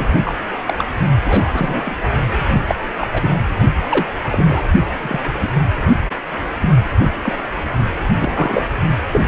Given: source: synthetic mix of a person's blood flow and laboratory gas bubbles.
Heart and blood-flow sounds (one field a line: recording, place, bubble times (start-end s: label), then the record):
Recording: Doppler ultrasound of blood flow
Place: precordium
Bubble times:
0.00-0.05 s: bubbles
0.24-0.32 s: bubbles
0.67-0.85 s: bubbles
1.25-1.97 s: bubbles
2.69-2.75 s: bubbles
3.00-3.07 s: bubbles
3.13-3.30 s: bubbles
3.89-4.06 s: bubbles
4.32-4.62 s: bubbles
5.02-5.19 s: bubbles
5.25-5.52 s: bubbles
6.60-6.69 s: bubbles
7.22-7.33 s: bubbles
8.19-8.66 s: bubbles
9.12-9.21 s: bubbles
From the record:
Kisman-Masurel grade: 232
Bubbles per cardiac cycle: several, 3 to 8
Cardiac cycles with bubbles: 50 to 99%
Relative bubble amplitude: moderate (0.250 to 0.450)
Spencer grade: 3 (all of the cardiac periods contain showers or single bubble signals, but not dominating or overriding the cardiac motion signals)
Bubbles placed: only in the low amplitude regions of the cardiac cycle